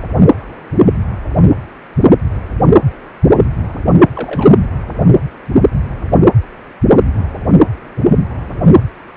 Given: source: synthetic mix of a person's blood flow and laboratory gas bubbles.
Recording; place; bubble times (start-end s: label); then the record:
Doppler ultrasound of blood flow; precordium
4.14-4.57 s: bubbles
From the record:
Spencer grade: 1 (occasional bubble signal discernible with the cardiac motion signal, with majority of cardiac periods free of bubbles); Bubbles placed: anywhere in the cardiac cycle